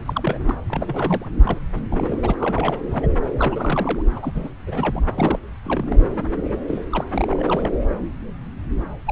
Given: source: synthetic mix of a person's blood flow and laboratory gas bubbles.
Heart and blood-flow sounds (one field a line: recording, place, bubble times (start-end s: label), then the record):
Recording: Doppler ultrasound of blood flow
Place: subclavian vein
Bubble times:
0.00-0.40 s: bubbles
0.47-0.54 s: bubbles
0.68-1.26 s: bubbles
1.42-1.57 s: bubbles
1.75-1.80 s: bubbles
1.91-2.34 s: bubbles
2.38-2.82 s: bubbles
2.86-3.07 s: bubbles
3.38-4.02 s: bubbles
4.16-4.20 s: bubbles
4.22-4.50 s: bubbles
4.67-5.00 s: bubbles
5.15-5.39 s: bubbles
5.66-5.97 s: bubbles
6.67-6.83 s: bubbles
6.92-7.04 s: bubbles
7.12-7.71 s: bubbles
9.06-9.12 s: bubbles
From the record:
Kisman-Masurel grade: 332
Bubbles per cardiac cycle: rolling drumbeat, 9 or more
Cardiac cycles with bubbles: 50 to 99%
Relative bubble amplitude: moderate (0.250 to 0.450)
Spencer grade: 3 (all of the cardiac periods contain showers or single bubble signals, but not dominating or overriding the cardiac motion signals)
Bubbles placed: anywhere in the cardiac cycle